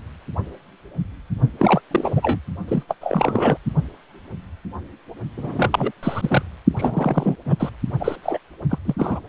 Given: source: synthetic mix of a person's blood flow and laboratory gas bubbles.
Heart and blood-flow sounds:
Doppler ultrasound of blood flow; precordium
1.58-1.81 s: bubbles
1.91-2.39 s: bubbles
2.68-2.83 s: bubbles
2.88-2.95 s: bubbles
3.01-3.58 s: bubbles
5.37-5.92 s: bubbles
6.03-6.42 s: bubbles
6.72-7.36 s: bubbles
7.46-7.56 s: bubbles
7.59-7.70 s: bubbles
8.00-8.16 s: bubbles
8.23-8.38 s: bubbles
8.69-8.78 s: bubbles
8.84-8.95 s: bubbles
8.98-9.20 s: bubbles
From the record:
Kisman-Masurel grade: 333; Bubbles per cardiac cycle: rolling drumbeat, 9 or more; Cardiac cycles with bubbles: 50 to 99%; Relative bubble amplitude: loud (0.450 to 0.775); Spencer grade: 3 (all of the cardiac periods contain showers or single bubble signals, but not dominating or overriding the cardiac motion signals); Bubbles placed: only in the low amplitude regions of the cardiac cycle

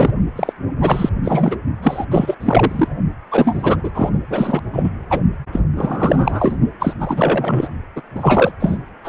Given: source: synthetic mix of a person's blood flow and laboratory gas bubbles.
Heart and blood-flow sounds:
Doppler ultrasound of blood flow; precordium
0.00-0.10 s: bubbles
0.35-0.53 s: bubbles
0.81-1.09 s: bubbles
1.24-1.57 s: bubbles
1.82-2.06 s: bubbles
2.11-2.35 s: bubbles
2.40-2.88 s: bubbles
3.30-3.76 s: bubbles
3.83-3.90 s: bubbles
3.94-4.10 s: bubbles
4.30-4.61 s: bubbles
4.73-4.90 s: bubbles
5.09-5.20 s: bubbles
5.52-5.60 s: bubbles
5.76-6.56 s: bubbles
6.79-6.93 s: bubbles
7.00-7.68 s: bubbles
7.96-8.02 s: bubbles
8.15-8.52 s: bubbles
8.60-8.78 s: bubbles
9.04-9.09 s: bubbles
From the record:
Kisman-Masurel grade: 343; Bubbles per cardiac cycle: rolling drumbeat, 9 or more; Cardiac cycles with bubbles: 100%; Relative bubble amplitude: loud (0.450 to 0.775); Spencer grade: 3 (all of the cardiac periods contain showers or single bubble signals, but not dominating or overriding the cardiac motion signals); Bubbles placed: only in the low amplitude regions of the cardiac cycle

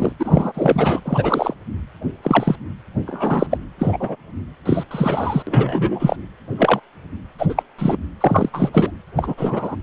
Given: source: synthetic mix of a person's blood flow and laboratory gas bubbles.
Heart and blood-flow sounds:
Doppler ultrasound of blood flow; precordium
0.00-0.12 s: bubbles
0.19-1.00 s: bubbles
1.04-1.54 s: bubbles
2.23-2.56 s: bubbles
3.06-3.46 s: bubbles
3.50-3.57 s: bubbles
3.79-4.16 s: bubbles
4.66-4.83 s: bubbles
4.91-5.42 s: bubbles
5.47-6.16 s: bubbles
6.57-6.80 s: bubbles
7.38-7.63 s: bubbles
7.78-7.97 s: bubbles
8.21-8.49 s: bubbles
8.53-8.70 s: bubbles
8.72-8.90 s: bubbles
9.16-9.76 s: bubbles
From the record:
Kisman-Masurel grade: 243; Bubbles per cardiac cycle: several, 3 to 8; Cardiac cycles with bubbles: 100%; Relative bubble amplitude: loud (0.450 to 0.775); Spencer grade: 3 (all of the cardiac periods contain showers or single bubble signals, but not dominating or overriding the cardiac motion signals); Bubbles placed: anywhere in the cardiac cycle

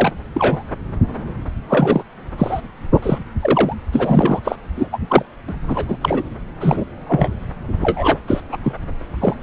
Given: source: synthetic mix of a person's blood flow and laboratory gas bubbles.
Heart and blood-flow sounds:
Doppler ultrasound of blood flow; subclavian vein
0.00-0.12 s: bubbles
0.34-0.62 s: bubbles
1.68-2.03 s: bubbles
2.38-2.60 s: bubbles
2.94-3.19 s: bubbles
3.41-3.75 s: bubbles
3.92-4.40 s: bubbles
4.44-4.55 s: bubbles
4.76-4.90 s: bubbles
4.92-4.98 s: bubbles
5.08-5.22 s: bubbles
5.47-5.54 s: bubbles
5.68-5.97 s: bubbles
6.01-6.23 s: bubbles
6.60-6.84 s: bubbles
7.08-7.29 s: bubbles
7.81-8.18 s: bubbles
8.27-8.40 s: bubbles
8.51-8.57 s: bubbles
8.63-8.72 s: bubbles
9.21-9.34 s: bubbles
From the record:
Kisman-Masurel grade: 233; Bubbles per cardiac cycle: several, 3 to 8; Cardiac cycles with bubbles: 50 to 99%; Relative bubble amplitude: loud (0.450 to 0.775); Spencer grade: 3 (all of the cardiac periods contain showers or single bubble signals, but not dominating or overriding the cardiac motion signals); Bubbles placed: anywhere in the cardiac cycle

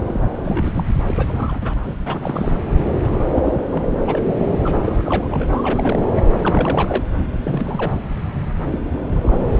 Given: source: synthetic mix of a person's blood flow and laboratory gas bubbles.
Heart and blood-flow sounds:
Doppler ultrasound of blood flow; subclavian vein
0.05-0.32 s: bubbles
0.44-0.81 s: bubbles
0.89-0.94 s: bubbles
1.07-1.74 s: bubbles
1.83-1.97 s: bubbles
1.99-2.56 s: bubbles
3.00-3.31 s: bubbles
3.35-3.62 s: bubbles
3.71-3.87 s: bubbles
4.07-4.21 s: bubbles
4.63-5.28 s: bubbles
5.30-6.08 s: bubbles
6.15-6.21 s: bubbles
6.42-7.03 s: bubbles
7.42-7.93 s: bubbles
8.71-8.79 s: bubbles
9.04-9.42 s: bubbles
9.56-9.60 s: bubbles
From the record:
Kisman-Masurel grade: 342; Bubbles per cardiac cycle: rolling drumbeat, 9 or more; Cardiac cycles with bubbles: 100%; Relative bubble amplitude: moderate (0.250 to 0.450); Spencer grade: 3 (all of the cardiac periods contain showers or single bubble signals, but not dominating or overriding the cardiac motion signals); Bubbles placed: anywhere in the cardiac cycle

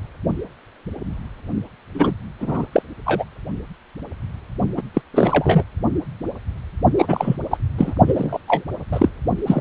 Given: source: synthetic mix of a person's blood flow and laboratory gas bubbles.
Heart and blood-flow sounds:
Doppler ultrasound of blood flow; precordium
1.95-2.12 s: bubbles
2.41-2.66 s: bubbles
2.72-2.83 s: bubbles
3.06-3.24 s: bubbles
4.77-4.82 s: bubbles
4.94-5.01 s: bubbles
5.13-5.63 s: bubbles
6.97-7.36 s: bubbles
7.50-7.58 s: bubbles
7.77-7.95 s: bubbles
8.06-8.38 s: bubbles
8.48-8.63 s: bubbles
8.92-9.09 s: bubbles
9.46-9.61 s: bubbles
From the record:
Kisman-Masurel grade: 223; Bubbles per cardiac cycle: several, 3 to 8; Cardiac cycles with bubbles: 10 to 50%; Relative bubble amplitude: loud (0.450 to 0.775); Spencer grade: 2 (many but less than half of the cardiac periods contain bubble signals, singularly or in groups); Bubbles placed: only in the low amplitude regions of the cardiac cycle

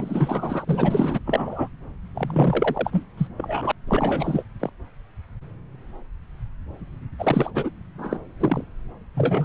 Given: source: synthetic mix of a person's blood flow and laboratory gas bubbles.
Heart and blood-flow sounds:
Doppler ultrasound of blood flow; subclavian vein
0.00-1.19 s: bubbles
1.25-1.68 s: bubbles
2.14-3.03 s: bubbles
3.17-3.28 s: bubbles
3.37-3.71 s: bubbles
3.87-4.42 s: bubbles
4.59-4.70 s: bubbles
7.18-7.50 s: bubbles
7.54-7.71 s: bubbles
7.98-8.18 s: bubbles
8.39-8.64 s: bubbles
9.14-9.45 s: bubbles
From the record:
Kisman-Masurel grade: 332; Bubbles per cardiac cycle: rolling drumbeat, 9 or more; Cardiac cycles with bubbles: 50 to 99%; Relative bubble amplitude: moderate (0.250 to 0.450); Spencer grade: 3 (all of the cardiac periods contain showers or single bubble signals, but not dominating or overriding the cardiac motion signals); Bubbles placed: anywhere in the cardiac cycle

